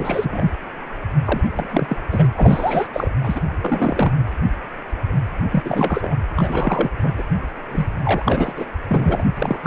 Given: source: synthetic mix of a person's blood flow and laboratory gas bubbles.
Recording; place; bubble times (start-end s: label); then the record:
Doppler ultrasound of blood flow; precordium
0.00-0.51 s: bubbles
1.26-1.41 s: bubbles
1.55-1.66 s: bubbles
1.72-1.97 s: bubbles
2.10-2.27 s: bubbles
2.35-2.88 s: bubbles
2.93-3.11 s: bubbles
3.23-3.41 s: bubbles
3.60-4.12 s: bubbles
5.50-6.15 s: bubbles
6.37-6.91 s: bubbles
7.00-7.14 s: bubbles
7.17-7.23 s: bubbles
7.71-7.87 s: bubbles
8.04-8.54 s: bubbles
8.56-8.66 s: bubbles
8.88-9.30 s: bubbles
9.37-9.60 s: bubbles
9.62-9.67 s: bubbles
From the record:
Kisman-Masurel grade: 332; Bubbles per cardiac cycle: rolling drumbeat, 9 or more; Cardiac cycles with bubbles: 50 to 99%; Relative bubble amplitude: moderate (0.250 to 0.450); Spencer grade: 3 (all of the cardiac periods contain showers or single bubble signals, but not dominating or overriding the cardiac motion signals); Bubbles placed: anywhere in the cardiac cycle